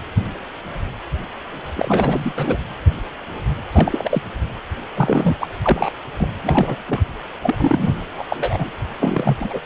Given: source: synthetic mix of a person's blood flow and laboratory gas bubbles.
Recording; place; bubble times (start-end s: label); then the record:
Doppler ultrasound of blood flow; precordium
1.75-2.33 s: bubbles
2.36-2.58 s: bubbles
3.72-4.21 s: bubbles
4.95-5.36 s: bubbles
5.39-5.48 s: bubbles
5.61-5.91 s: bubbles
6.17-6.28 s: bubbles
6.42-6.78 s: bubbles
6.86-7.00 s: bubbles
7.42-7.56 s: bubbles
7.58-7.98 s: bubbles
8.17-8.24 s: bubbles
8.29-8.71 s: bubbles
9.00-9.37 s: bubbles
9.40-9.60 s: bubbles
From the record:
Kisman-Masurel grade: 332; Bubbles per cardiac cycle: rolling drumbeat, 9 or more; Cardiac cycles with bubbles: 50 to 99%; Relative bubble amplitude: moderate (0.250 to 0.450); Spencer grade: 3 (all of the cardiac periods contain showers or single bubble signals, but not dominating or overriding the cardiac motion signals); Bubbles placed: anywhere in the cardiac cycle